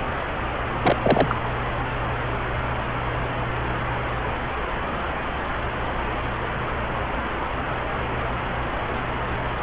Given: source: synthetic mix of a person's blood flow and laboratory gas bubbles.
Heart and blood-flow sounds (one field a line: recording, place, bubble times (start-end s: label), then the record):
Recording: Doppler ultrasound of blood flow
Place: subclavian vein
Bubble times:
0.82-0.97 s: bubbles
1.02-1.36 s: bubbles
From the record:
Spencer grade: 1 (occasional bubble signal discernible with the cardiac motion signal, with majority of cardiac periods free of bubbles)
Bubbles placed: anywhere in the cardiac cycle